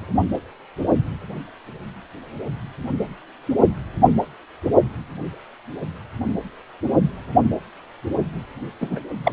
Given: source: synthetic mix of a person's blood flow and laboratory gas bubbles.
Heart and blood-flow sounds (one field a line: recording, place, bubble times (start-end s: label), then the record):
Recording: Doppler ultrasound of blood flow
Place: precordium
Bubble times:
8.80-9.00 s: bubbles
9.25-9.33 s: bubbles
From the record:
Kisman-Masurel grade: 212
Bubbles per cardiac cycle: several, 3 to 8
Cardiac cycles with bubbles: 1 to 10%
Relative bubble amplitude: moderate (0.250 to 0.450)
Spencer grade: 1 (occasional bubble signal discernible with the cardiac motion signal, with majority of cardiac periods free of bubbles)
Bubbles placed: only in the low amplitude regions of the cardiac cycle